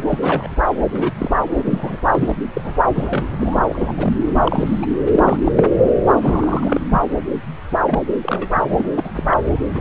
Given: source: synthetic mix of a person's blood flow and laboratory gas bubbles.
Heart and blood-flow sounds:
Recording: Doppler ultrasound of blood flow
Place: subclavian vein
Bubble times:
0.08-0.18 s: bubbles
0.21-0.51 s: bubbles
0.91-1.13 s: bubbles
1.18-1.30 s: bubbles
1.56-1.97 s: bubbles
2.12-2.35 s: bubbles
2.55-2.76 s: bubbles
2.95-3.59 s: bubbles
3.67-3.92 s: bubbles
3.95-4.13 s: bubbles
4.26-4.33 s: bubbles
4.44-4.86 s: bubbles
5.11-5.51 s: bubbles
5.55-5.69 s: bubbles
6.21-6.80 s: bubbles
6.90-7.01 s: bubbles
7.85-8.01 s: bubbles
8.21-8.90 s: bubbles
8.96-9.11 s: bubbles
9.15-9.23 s: bubbles
9.30-9.38 s: bubbles
9.73-9.81 s: bubbles
From the record:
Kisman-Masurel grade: 242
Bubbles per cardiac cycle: several, 3 to 8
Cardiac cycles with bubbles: 100%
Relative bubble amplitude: moderate (0.250 to 0.450)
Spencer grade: 3 (all of the cardiac periods contain showers or single bubble signals, but not dominating or overriding the cardiac motion signals)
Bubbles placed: anywhere in the cardiac cycle

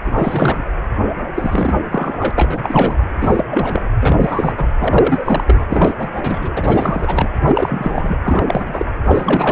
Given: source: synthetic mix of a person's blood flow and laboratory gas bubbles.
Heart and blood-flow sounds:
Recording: Doppler ultrasound of blood flow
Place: precordium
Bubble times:
0.05-0.62 s: bubbles
1.35-1.74 s: bubbles
1.91-2.31 s: bubbles
2.35-2.98 s: bubbles
3.19-3.82 s: bubbles
4.00-4.52 s: bubbles
4.56-4.69 s: bubbles
4.80-5.44 s: bubbles
5.46-5.66 s: bubbles
5.69-5.94 s: bubbles
5.96-7.27 s: bubbles
7.46-8.17 s: bubbles
8.23-8.44 s: bubbles
8.47-8.86 s: bubbles
9.07-9.52 s: bubbles
From the record:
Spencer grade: 3 (all of the cardiac periods contain showers or single bubble signals, but not dominating or overriding the cardiac motion signals)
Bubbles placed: anywhere in the cardiac cycle

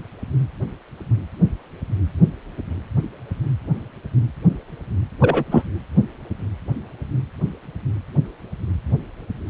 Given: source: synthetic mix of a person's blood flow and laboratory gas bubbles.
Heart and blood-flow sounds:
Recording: Doppler ultrasound of blood flow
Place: precordium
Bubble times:
5.21-5.44 s: bubbles
5.51-5.62 s: bubbles
From the record:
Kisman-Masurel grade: 213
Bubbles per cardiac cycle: several, 3 to 8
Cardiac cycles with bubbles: 1 to 10%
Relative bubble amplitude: loud (0.450 to 0.775)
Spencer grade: 1 (occasional bubble signal discernible with the cardiac motion signal, with majority of cardiac periods free of bubbles)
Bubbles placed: anywhere in the cardiac cycle

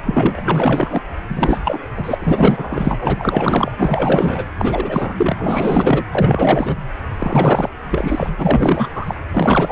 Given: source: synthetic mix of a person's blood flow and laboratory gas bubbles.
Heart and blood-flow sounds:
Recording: Doppler ultrasound of blood flow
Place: precordium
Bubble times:
0.05-1.01 s: bubbles
1.29-1.79 s: bubbles
1.96-2.15 s: bubbles
2.19-2.97 s: bubbles
3.00-3.72 s: bubbles
3.77-4.45 s: bubbles
4.57-5.34 s: bubbles
5.38-6.04 s: bubbles
6.11-6.76 s: bubbles
7.17-7.70 s: bubbles
7.91-8.30 s: bubbles
8.38-8.88 s: bubbles
8.95-9.14 s: bubbles
9.26-9.72 s: bubbles
From the record:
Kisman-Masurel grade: 444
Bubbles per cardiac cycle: continuous sound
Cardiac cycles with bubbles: 100%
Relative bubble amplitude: maximal (0.775 to 0.999)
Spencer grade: 4 (maximum detectable bubble signal sounding continuously throughout systole and diastole of every cardiac period, and overriding the amplitude of the normal cardiac signals)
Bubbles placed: anywhere in the cardiac cycle

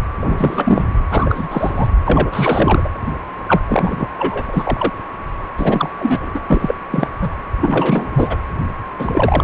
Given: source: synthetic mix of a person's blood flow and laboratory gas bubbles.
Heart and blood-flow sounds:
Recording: Doppler ultrasound of blood flow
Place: precordium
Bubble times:
0.20-0.98 s: bubbles
1.09-1.89 s: bubbles
2.07-2.29 s: bubbles
2.32-2.91 s: bubbles
3.48-3.60 s: bubbles
3.69-4.09 s: bubbles
4.16-4.90 s: bubbles
5.58-5.89 s: bubbles
5.98-6.31 s: bubbles
6.34-6.41 s: bubbles
6.46-6.75 s: bubbles
6.91-7.10 s: bubbles
7.21-7.29 s: bubbles
7.60-8.08 s: bubbles
8.12-8.37 s: bubbles
8.98-9.44 s: bubbles
From the record:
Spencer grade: 3 (all of the cardiac periods contain showers or single bubble signals, but not dominating or overriding the cardiac motion signals)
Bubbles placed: anywhere in the cardiac cycle

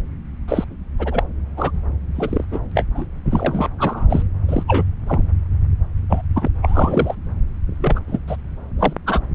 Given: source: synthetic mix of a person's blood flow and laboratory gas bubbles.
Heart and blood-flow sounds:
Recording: Doppler ultrasound of blood flow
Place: subclavian vein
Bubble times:
0.48-0.65 s: bubbles
0.99-1.24 s: bubbles
1.57-1.71 s: bubbles
2.15-2.46 s: bubbles
2.51-2.60 s: bubbles
2.75-2.83 s: bubbles
2.94-3.05 s: bubbles
3.25-3.68 s: bubbles
3.78-4.22 s: bubbles
4.48-4.63 s: bubbles
4.67-4.83 s: bubbles
5.08-5.28 s: bubbles
6.09-6.21 s: bubbles
6.35-6.49 s: bubbles
6.62-7.15 s: bubbles
7.67-8.00 s: bubbles
8.07-8.18 s: bubbles
8.27-8.36 s: bubbles
8.79-8.93 s: bubbles
9.06-9.20 s: bubbles
From the record:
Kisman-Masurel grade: 242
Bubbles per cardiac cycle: several, 3 to 8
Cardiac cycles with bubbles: 100%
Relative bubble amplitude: moderate (0.250 to 0.450)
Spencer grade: 3 (all of the cardiac periods contain showers or single bubble signals, but not dominating or overriding the cardiac motion signals)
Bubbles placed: anywhere in the cardiac cycle

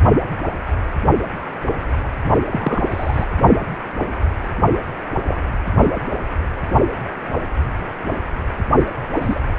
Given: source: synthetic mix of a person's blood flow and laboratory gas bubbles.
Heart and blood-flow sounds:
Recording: Doppler ultrasound of blood flow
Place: precordium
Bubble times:
2.50-3.26 s: bubbles
5.26-5.37 s: bubbles
9.14-9.40 s: bubbles
From the record:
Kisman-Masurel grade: 122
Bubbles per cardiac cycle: 1 to 2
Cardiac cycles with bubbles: 10 to 50%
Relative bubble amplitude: moderate (0.250 to 0.450)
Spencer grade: 2 (many but less than half of the cardiac periods contain bubble signals, singularly or in groups)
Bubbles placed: only in the low amplitude regions of the cardiac cycle

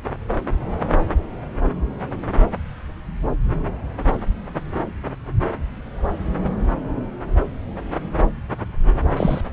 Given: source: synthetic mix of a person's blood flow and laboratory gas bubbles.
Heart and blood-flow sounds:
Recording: Doppler ultrasound of blood flow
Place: subclavian vein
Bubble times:
9.17-9.41 s: bubbles
From the record:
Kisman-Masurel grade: 113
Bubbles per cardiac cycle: 1 to 2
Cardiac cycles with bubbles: 1 to 10%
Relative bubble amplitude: loud (0.450 to 0.775)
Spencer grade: 1 (occasional bubble signal discernible with the cardiac motion signal, with majority of cardiac periods free of bubbles)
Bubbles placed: anywhere in the cardiac cycle

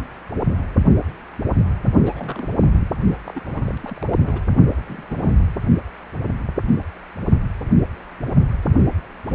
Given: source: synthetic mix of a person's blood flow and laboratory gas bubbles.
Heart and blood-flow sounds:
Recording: Doppler ultrasound of blood flow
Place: precordium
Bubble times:
2.04-2.48 s: bubbles
2.59-2.66 s: bubbles
2.80-2.86 s: bubbles
3.25-3.42 s: bubbles
3.45-3.62 s: bubbles
3.68-3.71 s: bubbles
3.83-4.04 s: bubbles
4.06-4.19 s: bubbles
4.25-4.42 s: bubbles
4.86-5.34 s: bubbles
From the record:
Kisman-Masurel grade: 221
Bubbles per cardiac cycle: several, 3 to 8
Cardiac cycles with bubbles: 10 to 50%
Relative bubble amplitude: barely perceptible (0.100 to 0.250)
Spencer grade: 2 (many but less than half of the cardiac periods contain bubble signals, singularly or in groups)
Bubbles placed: only in the low amplitude regions of the cardiac cycle

